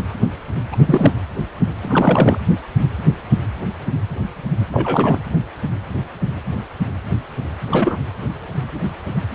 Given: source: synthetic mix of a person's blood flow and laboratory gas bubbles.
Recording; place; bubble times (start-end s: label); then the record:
Doppler ultrasound of blood flow; precordium
0.71-0.76 s: bubbles
0.85-1.13 s: bubbles
1.82-2.39 s: bubbles
4.72-5.18 s: bubbles
7.71-7.96 s: bubbles
From the record:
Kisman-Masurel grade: 222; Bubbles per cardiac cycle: several, 3 to 8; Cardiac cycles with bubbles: 10 to 50%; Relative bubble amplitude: moderate (0.250 to 0.450); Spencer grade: 2 (many but less than half of the cardiac periods contain bubble signals, singularly or in groups); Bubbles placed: anywhere in the cardiac cycle